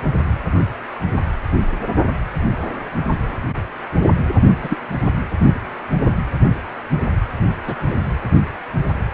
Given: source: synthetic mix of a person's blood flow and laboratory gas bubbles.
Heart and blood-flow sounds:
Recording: Doppler ultrasound of blood flow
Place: precordium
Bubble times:
4.62-4.77 s: bubbles
7.65-7.76 s: bubbles
7.87-7.96 s: bubbles
From the record:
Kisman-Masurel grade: 122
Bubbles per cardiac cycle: 1 to 2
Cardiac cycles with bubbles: 10 to 50%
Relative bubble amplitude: moderate (0.250 to 0.450)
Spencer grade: 2 (many but less than half of the cardiac periods contain bubble signals, singularly or in groups)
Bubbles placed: anywhere in the cardiac cycle

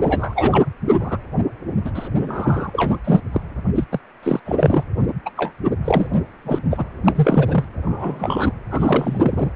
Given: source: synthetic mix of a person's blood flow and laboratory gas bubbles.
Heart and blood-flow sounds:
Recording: Doppler ultrasound of blood flow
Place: precordium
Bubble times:
0.01-0.66 s: bubbles
0.91-1.17 s: bubbles
1.85-1.91 s: bubbles
1.94-2.08 s: bubbles
2.19-2.70 s: bubbles
2.73-2.96 s: bubbles
3.04-3.21 s: bubbles
3.32-3.41 s: bubbles
3.75-3.84 s: bubbles
3.91-3.99 s: bubbles
4.22-4.40 s: bubbles
4.45-4.56 s: bubbles
4.59-4.83 s: bubbles
5.25-5.30 s: bubbles
5.37-5.52 s: bubbles
5.84-6.07 s: bubbles
6.13-6.17 s: bubbles
6.44-6.58 s: bubbles
6.71-6.84 s: bubbles
7.04-7.12 s: bubbles
7.15-7.65 s: bubbles
7.83-8.52 s: bubbles
8.70-9.49 s: bubbles
From the record:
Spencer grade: 3 (all of the cardiac periods contain showers or single bubble signals, but not dominating or overriding the cardiac motion signals)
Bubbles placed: anywhere in the cardiac cycle

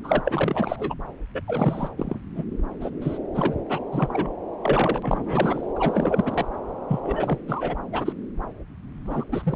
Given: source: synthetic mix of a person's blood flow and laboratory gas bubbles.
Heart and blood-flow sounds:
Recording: Doppler ultrasound of blood flow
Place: subclavian vein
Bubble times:
0.04-0.23 s: bubbles
0.25-0.94 s: bubbles
1.35-1.41 s: bubbles
1.48-1.89 s: bubbles
1.97-2.19 s: bubbles
2.35-2.44 s: bubbles
2.81-2.90 s: bubbles
3.01-3.19 s: bubbles
3.35-3.54 s: bubbles
3.69-3.79 s: bubbles
3.92-4.39 s: bubbles
4.61-5.73 s: bubbles
5.76-6.45 s: bubbles
6.88-6.99 s: bubbles
7.02-7.38 s: bubbles
7.48-7.75 s: bubbles
7.92-8.12 s: bubbles
9.05-9.24 s: bubbles
9.31-9.56 s: bubbles
From the record:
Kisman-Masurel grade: 332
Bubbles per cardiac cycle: rolling drumbeat, 9 or more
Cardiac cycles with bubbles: 50 to 99%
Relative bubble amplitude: moderate (0.250 to 0.450)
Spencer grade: 3 (all of the cardiac periods contain showers or single bubble signals, but not dominating or overriding the cardiac motion signals)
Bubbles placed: anywhere in the cardiac cycle

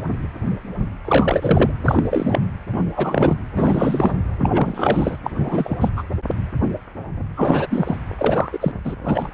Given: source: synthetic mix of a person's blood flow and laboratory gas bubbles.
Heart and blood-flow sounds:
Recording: Doppler ultrasound of blood flow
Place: precordium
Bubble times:
1.05-1.72 s: bubbles
1.84-2.46 s: bubbles
2.72-2.83 s: bubbles
2.93-3.36 s: bubbles
3.55-4.12 s: bubbles
4.38-5.17 s: bubbles
5.23-5.30 s: bubbles
5.35-5.77 s: bubbles
5.80-5.90 s: bubbles
5.96-6.03 s: bubbles
7.37-7.97 s: bubbles
8.18-8.49 s: bubbles
8.53-8.71 s: bubbles
8.85-8.96 s: bubbles
9.04-9.29 s: bubbles
From the record:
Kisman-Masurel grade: 333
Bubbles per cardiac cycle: rolling drumbeat, 9 or more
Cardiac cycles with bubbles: 50 to 99%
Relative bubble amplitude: loud (0.450 to 0.775)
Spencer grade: 3 (all of the cardiac periods contain showers or single bubble signals, but not dominating or overriding the cardiac motion signals)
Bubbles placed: anywhere in the cardiac cycle

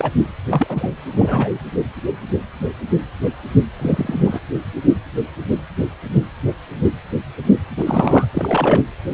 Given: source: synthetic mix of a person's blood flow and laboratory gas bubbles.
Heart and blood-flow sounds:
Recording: Doppler ultrasound of blood flow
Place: precordium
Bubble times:
0.00-0.12 s: bubbles
0.50-0.90 s: bubbles
1.16-1.59 s: bubbles
3.79-4.39 s: bubbles
7.70-8.28 s: bubbles
8.33-8.83 s: bubbles
From the record:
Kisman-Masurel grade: 223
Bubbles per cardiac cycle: several, 3 to 8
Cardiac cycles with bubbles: 10 to 50%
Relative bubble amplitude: loud (0.450 to 0.775)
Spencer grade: 2 (many but less than half of the cardiac periods contain bubble signals, singularly or in groups)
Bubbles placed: anywhere in the cardiac cycle

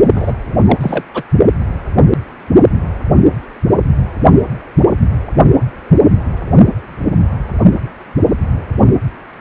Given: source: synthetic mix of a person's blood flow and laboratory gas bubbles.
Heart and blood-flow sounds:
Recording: Doppler ultrasound of blood flow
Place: precordium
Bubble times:
0.14-0.32 s: bubbles
0.41-0.78 s: bubbles
0.81-1.04 s: bubbles
1.14-1.23 s: bubbles
From the record:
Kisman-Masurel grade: 213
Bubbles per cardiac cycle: several, 3 to 8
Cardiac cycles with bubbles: 1 to 10%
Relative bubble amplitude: loud (0.450 to 0.775)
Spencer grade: 1 (occasional bubble signal discernible with the cardiac motion signal, with majority of cardiac periods free of bubbles)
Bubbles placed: only in the low amplitude regions of the cardiac cycle

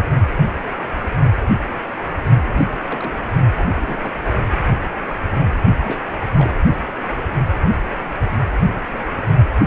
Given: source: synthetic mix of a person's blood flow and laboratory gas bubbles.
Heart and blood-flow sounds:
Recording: Doppler ultrasound of blood flow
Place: precordium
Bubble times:
2.44-3.21 s: bubbles
3.57-3.69 s: bubbles
3.77-4.11 s: bubbles
5.79-6.01 s: bubbles
6.36-6.50 s: bubbles
From the record:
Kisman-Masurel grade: 221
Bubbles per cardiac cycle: several, 3 to 8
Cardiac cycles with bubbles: 10 to 50%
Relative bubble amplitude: barely perceptible (0.100 to 0.250)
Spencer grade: 2 (many but less than half of the cardiac periods contain bubble signals, singularly or in groups)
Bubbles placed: only in the low amplitude regions of the cardiac cycle

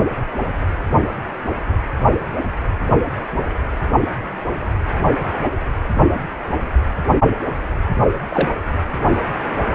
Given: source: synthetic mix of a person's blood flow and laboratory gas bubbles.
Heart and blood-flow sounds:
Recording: Doppler ultrasound of blood flow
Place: precordium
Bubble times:
8.29-8.52 s: bubbles
From the record:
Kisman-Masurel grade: 112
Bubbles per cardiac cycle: 1 to 2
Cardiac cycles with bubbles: 1 to 10%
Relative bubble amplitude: moderate (0.250 to 0.450)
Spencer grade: 1 (occasional bubble signal discernible with the cardiac motion signal, with majority of cardiac periods free of bubbles)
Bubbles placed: anywhere in the cardiac cycle

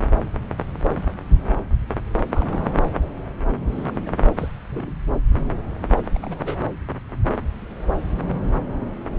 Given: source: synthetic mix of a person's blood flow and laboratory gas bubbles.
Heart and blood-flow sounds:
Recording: Doppler ultrasound of blood flow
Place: subclavian vein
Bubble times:
2.28-2.72 s: bubbles
3.67-4.02 s: bubbles
4.05-4.12 s: bubbles
4.37-4.52 s: bubbles
4.70-4.93 s: bubbles
6.14-6.19 s: bubbles
6.22-6.62 s: bubbles
From the record:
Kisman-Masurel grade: 221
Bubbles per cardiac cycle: several, 3 to 8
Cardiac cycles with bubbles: 10 to 50%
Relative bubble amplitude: barely perceptible (0.100 to 0.250)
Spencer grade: 2 (many but less than half of the cardiac periods contain bubble signals, singularly or in groups)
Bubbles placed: anywhere in the cardiac cycle

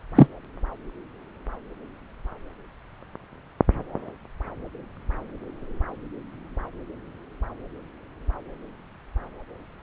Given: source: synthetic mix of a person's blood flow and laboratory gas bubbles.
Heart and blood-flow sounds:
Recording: Doppler ultrasound of blood flow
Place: subclavian vein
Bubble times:
0.15-0.27 s: bubbles
From the record:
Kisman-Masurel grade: 113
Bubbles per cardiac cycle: 1 to 2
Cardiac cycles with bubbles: 1 to 10%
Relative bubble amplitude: loud (0.450 to 0.775)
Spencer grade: 1 (occasional bubble signal discernible with the cardiac motion signal, with majority of cardiac periods free of bubbles)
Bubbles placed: anywhere in the cardiac cycle

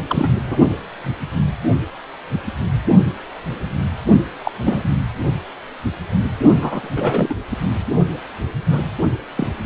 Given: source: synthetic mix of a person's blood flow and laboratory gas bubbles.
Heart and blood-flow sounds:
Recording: Doppler ultrasound of blood flow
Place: precordium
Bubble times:
0.08-0.30 s: bubbles
0.47-0.57 s: bubbles
4.44-4.51 s: bubbles
4.62-4.88 s: bubbles
6.60-6.89 s: bubbles
6.96-7.34 s: bubbles
8.71-8.80 s: bubbles
9.37-9.47 s: bubbles
9.63-9.66 s: bubbles
From the record:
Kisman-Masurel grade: 222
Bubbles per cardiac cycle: several, 3 to 8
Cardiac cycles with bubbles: 10 to 50%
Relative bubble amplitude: moderate (0.250 to 0.450)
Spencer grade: 2 (many but less than half of the cardiac periods contain bubble signals, singularly or in groups)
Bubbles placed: only in the low amplitude regions of the cardiac cycle

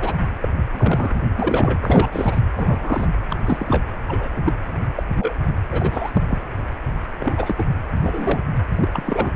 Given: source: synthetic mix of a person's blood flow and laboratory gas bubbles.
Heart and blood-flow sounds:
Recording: Doppler ultrasound of blood flow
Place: precordium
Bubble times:
0.00-0.16 s: bubbles
0.42-0.49 s: bubbles
0.71-1.14 s: bubbles
1.36-2.08 s: bubbles
2.12-2.41 s: bubbles
2.56-3.10 s: bubbles
3.30-3.35 s: bubbles
3.46-3.84 s: bubbles
4.07-4.53 s: bubbles
4.95-5.03 s: bubbles
5.14-5.33 s: bubbles
5.71-6.11 s: bubbles
6.13-6.24 s: bubbles
6.28-6.42 s: bubbles
7.20-7.64 s: bubbles
8.02-8.40 s: bubbles
8.77-9.30 s: bubbles
From the record:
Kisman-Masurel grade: 232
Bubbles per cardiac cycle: several, 3 to 8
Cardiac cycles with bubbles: 50 to 99%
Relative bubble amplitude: moderate (0.250 to 0.450)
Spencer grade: 3 (all of the cardiac periods contain showers or single bubble signals, but not dominating or overriding the cardiac motion signals)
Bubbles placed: anywhere in the cardiac cycle

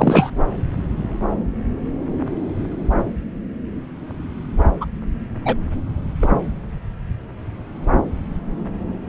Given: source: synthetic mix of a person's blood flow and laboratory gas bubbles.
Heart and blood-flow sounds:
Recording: Doppler ultrasound of blood flow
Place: subclavian vein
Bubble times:
0.00-0.31 s: bubbles
4.81-4.86 s: bubbles
5.45-5.56 s: bubbles
6.22-6.27 s: bubbles
From the record:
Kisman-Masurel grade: 123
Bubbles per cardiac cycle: 1 to 2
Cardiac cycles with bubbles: 10 to 50%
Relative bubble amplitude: loud (0.450 to 0.775)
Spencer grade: 2 (many but less than half of the cardiac periods contain bubble signals, singularly or in groups)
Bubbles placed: anywhere in the cardiac cycle

